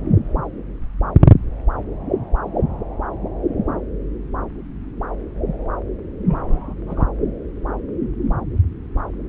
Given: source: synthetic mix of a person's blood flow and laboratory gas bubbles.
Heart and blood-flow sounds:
Doppler ultrasound of blood flow; subclavian vein
6.25-6.74 s: bubbles
6.86-7.05 s: bubbles
From the record:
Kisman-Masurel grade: 111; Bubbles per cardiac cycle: 1 to 2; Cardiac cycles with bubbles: 1 to 10%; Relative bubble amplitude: barely perceptible (0.100 to 0.250); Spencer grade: 1 (occasional bubble signal discernible with the cardiac motion signal, with majority of cardiac periods free of bubbles); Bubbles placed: anywhere in the cardiac cycle

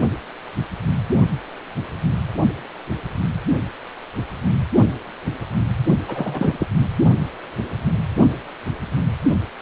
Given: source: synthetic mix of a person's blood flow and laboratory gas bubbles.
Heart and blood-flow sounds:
Doppler ultrasound of blood flow; precordium
6.08-6.67 s: bubbles
From the record:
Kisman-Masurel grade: 212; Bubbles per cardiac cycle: several, 3 to 8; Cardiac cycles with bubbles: 1 to 10%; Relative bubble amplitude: moderate (0.250 to 0.450); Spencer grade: 1 (occasional bubble signal discernible with the cardiac motion signal, with majority of cardiac periods free of bubbles); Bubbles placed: only in the low amplitude regions of the cardiac cycle

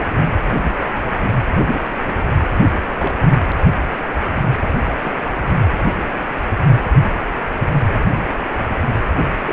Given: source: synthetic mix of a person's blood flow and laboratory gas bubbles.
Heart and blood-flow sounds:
Doppler ultrasound of blood flow; precordium
2.96-3.40 s: bubbles
5.04-5.16 s: bubbles
9.45-9.53 s: bubbles
From the record:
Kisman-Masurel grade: 121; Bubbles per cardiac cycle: 1 to 2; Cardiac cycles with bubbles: 10 to 50%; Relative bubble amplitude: barely perceptible (0.100 to 0.250); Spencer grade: 2 (many but less than half of the cardiac periods contain bubble signals, singularly or in groups); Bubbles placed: anywhere in the cardiac cycle

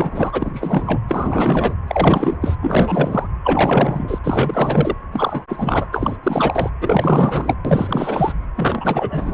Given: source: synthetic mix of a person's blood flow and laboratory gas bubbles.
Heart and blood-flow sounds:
Doppler ultrasound of blood flow; precordium
0.00-1.00 s: bubbles
1.07-1.75 s: bubbles
1.88-2.38 s: bubbles
2.41-2.56 s: bubbles
2.61-3.27 s: bubbles
3.44-4.19 s: bubbles
4.24-4.95 s: bubbles
5.11-5.44 s: bubbles
5.49-5.88 s: bubbles
5.92-6.17 s: bubbles
6.23-6.70 s: bubbles
6.81-7.55 s: bubbles
7.65-8.33 s: bubbles
8.56-9.33 s: bubbles
From the record:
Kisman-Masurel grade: 444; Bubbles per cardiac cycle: continuous sound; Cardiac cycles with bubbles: 100%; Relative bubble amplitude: maximal (0.775 to 0.999); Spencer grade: 4 (maximum detectable bubble signal sounding continuously throughout systole and diastole of every cardiac period, and overriding the amplitude of the normal cardiac signals); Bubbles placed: anywhere in the cardiac cycle

